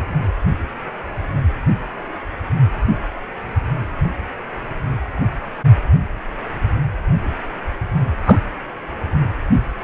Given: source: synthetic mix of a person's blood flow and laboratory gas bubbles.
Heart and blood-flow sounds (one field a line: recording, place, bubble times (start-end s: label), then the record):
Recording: Doppler ultrasound of blood flow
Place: precordium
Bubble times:
8.25-8.39 s: bubbles
From the record:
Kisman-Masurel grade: 122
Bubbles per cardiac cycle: 1 to 2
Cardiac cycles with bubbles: 10 to 50%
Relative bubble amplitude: moderate (0.250 to 0.450)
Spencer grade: 2 (many but less than half of the cardiac periods contain bubble signals, singularly or in groups)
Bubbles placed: anywhere in the cardiac cycle